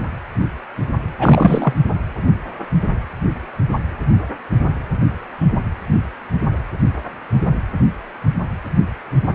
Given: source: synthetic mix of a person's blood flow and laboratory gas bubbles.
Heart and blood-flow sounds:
Doppler ultrasound of blood flow; precordium
1.18-1.74 s: bubbles
From the record:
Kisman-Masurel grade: 213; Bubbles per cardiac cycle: several, 3 to 8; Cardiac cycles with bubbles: 1 to 10%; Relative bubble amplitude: loud (0.450 to 0.775); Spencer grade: 1 (occasional bubble signal discernible with the cardiac motion signal, with majority of cardiac periods free of bubbles); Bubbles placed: anywhere in the cardiac cycle

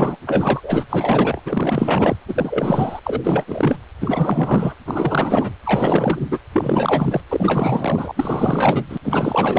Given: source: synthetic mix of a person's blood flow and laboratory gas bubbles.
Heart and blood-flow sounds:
Doppler ultrasound of blood flow; precordium
0.00-0.17 s: bubbles
0.27-0.85 s: bubbles
0.89-1.40 s: bubbles
1.45-2.16 s: bubbles
2.28-3.00 s: bubbles
3.03-3.21 s: bubbles
3.24-3.44 s: bubbles
3.47-3.78 s: bubbles
4.00-4.74 s: bubbles
4.86-5.54 s: bubbles
5.65-6.21 s: bubbles
6.30-6.39 s: bubbles
6.53-7.21 s: bubbles
7.29-8.85 s: bubbles
8.89-8.97 s: bubbles
9.04-9.59 s: bubbles
From the record:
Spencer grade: 4 (maximum detectable bubble signal sounding continuously throughout systole and diastole of every cardiac period, and overriding the amplitude of the normal cardiac signals); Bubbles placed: anywhere in the cardiac cycle

